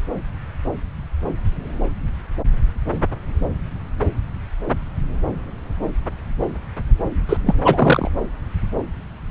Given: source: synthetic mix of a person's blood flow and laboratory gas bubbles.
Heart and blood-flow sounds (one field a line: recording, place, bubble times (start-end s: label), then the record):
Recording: Doppler ultrasound of blood flow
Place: subclavian vein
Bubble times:
7.28-7.37 s: bubbles
7.46-7.54 s: bubbles
7.63-8.11 s: bubbles
From the record:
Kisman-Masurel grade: 213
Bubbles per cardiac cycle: several, 3 to 8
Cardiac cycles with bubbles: 1 to 10%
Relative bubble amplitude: loud (0.450 to 0.775)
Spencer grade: 1 (occasional bubble signal discernible with the cardiac motion signal, with majority of cardiac periods free of bubbles)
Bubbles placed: anywhere in the cardiac cycle